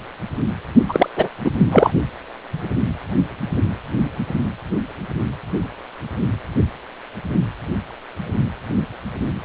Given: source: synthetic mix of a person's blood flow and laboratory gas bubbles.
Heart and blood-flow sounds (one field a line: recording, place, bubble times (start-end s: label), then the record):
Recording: Doppler ultrasound of blood flow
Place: precordium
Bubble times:
0.89-1.08 s: bubbles
1.16-1.28 s: bubbles
1.45-1.50 s: bubbles
1.72-1.91 s: bubbles
From the record:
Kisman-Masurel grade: 213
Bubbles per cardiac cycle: several, 3 to 8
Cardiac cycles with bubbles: 1 to 10%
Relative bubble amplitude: loud (0.450 to 0.775)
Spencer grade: 1 (occasional bubble signal discernible with the cardiac motion signal, with majority of cardiac periods free of bubbles)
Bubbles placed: only in the low amplitude regions of the cardiac cycle